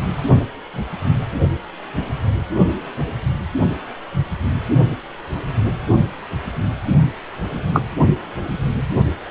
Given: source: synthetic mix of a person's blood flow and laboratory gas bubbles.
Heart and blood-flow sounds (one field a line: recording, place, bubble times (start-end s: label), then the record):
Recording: Doppler ultrasound of blood flow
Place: precordium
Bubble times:
7.74-7.82 s: bubbles
From the record:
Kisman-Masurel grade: 113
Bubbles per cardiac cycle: 1 to 2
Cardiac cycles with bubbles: 1 to 10%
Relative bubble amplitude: loud (0.450 to 0.775)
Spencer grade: 1 (occasional bubble signal discernible with the cardiac motion signal, with majority of cardiac periods free of bubbles)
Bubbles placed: only in the low amplitude regions of the cardiac cycle